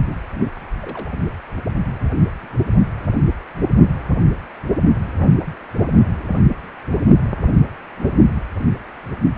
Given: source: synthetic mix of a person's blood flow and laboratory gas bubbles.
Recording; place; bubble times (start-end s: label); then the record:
Doppler ultrasound of blood flow; precordium
0.81-1.18 s: bubbles
1.81-1.98 s: bubbles
2.02-2.10 s: bubbles
From the record:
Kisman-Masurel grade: 211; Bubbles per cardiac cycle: several, 3 to 8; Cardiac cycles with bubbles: 1 to 10%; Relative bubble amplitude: barely perceptible (0.100 to 0.250); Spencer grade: 1 (occasional bubble signal discernible with the cardiac motion signal, with majority of cardiac periods free of bubbles); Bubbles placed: only in the low amplitude regions of the cardiac cycle